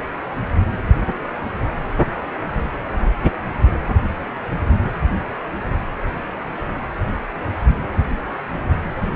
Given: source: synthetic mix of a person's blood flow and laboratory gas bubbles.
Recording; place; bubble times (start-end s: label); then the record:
Doppler ultrasound of blood flow; precordium
no bubbles
From the record:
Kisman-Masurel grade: 000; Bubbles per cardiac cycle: 0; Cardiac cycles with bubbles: 0%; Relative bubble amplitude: no bubbles discernible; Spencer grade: 0 (complete lack of bubble signals)